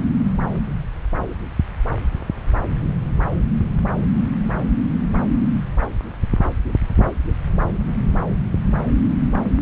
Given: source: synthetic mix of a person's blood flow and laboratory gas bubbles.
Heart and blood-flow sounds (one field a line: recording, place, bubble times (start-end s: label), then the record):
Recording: Doppler ultrasound of blood flow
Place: subclavian vein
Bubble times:
no bubbles
From the record:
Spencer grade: 0 (complete lack of bubble signals)